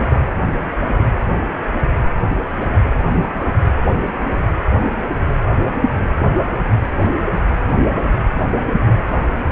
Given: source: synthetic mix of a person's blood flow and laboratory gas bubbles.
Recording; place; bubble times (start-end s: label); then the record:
Doppler ultrasound of blood flow; precordium
0.00-0.21 s: bubbles
From the record:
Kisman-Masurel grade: 111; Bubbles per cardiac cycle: 1 to 2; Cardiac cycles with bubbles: 1 to 10%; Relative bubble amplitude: barely perceptible (0.100 to 0.250); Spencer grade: 1 (occasional bubble signal discernible with the cardiac motion signal, with majority of cardiac periods free of bubbles); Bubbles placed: anywhere in the cardiac cycle